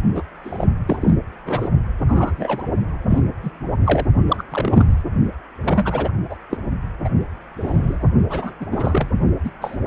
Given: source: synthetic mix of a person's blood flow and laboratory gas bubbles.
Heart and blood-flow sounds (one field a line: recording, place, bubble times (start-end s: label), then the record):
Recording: Doppler ultrasound of blood flow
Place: precordium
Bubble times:
0.15-0.23 s: bubbles
0.44-0.66 s: bubbles
0.88-1.16 s: bubbles
1.45-1.69 s: bubbles
2.08-2.63 s: bubbles
3.10-3.19 s: bubbles
3.43-3.52 s: bubbles
3.84-4.06 s: bubbles
4.28-4.43 s: bubbles
4.51-5.02 s: bubbles
5.63-6.11 s: bubbles
6.29-6.36 s: bubbles
6.50-6.58 s: bubbles
7.04-7.09 s: bubbles
7.57-8.05 s: bubbles
8.29-8.53 s: bubbles
8.60-8.66 s: bubbles
8.71-9.10 s: bubbles
9.45-9.51 s: bubbles
9.61-9.77 s: bubbles
From the record:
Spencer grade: 3 (all of the cardiac periods contain showers or single bubble signals, but not dominating or overriding the cardiac motion signals)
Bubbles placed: only in the low amplitude regions of the cardiac cycle